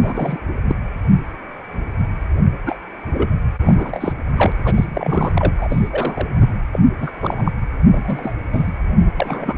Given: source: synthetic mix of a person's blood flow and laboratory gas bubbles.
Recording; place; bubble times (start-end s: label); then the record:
Doppler ultrasound of blood flow; precordium
0.02-0.38 s: bubbles
0.67-0.75 s: bubbles
2.66-2.77 s: bubbles
3.13-3.29 s: bubbles
3.65-4.12 s: bubbles
4.35-4.52 s: bubbles
4.64-5.32 s: bubbles
5.35-5.52 s: bubbles
5.57-6.27 s: bubbles
6.41-6.48 s: bubbles
6.72-6.79 s: bubbles
6.98-7.10 s: bubbles
7.21-7.52 s: bubbles
7.92-8.33 s: bubbles
8.52-8.71 s: bubbles
9.17-9.55 s: bubbles
From the record:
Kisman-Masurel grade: 232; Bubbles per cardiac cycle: several, 3 to 8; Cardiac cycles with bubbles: 50 to 99%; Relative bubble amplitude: moderate (0.250 to 0.450); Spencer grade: 3 (all of the cardiac periods contain showers or single bubble signals, but not dominating or overriding the cardiac motion signals); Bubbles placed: anywhere in the cardiac cycle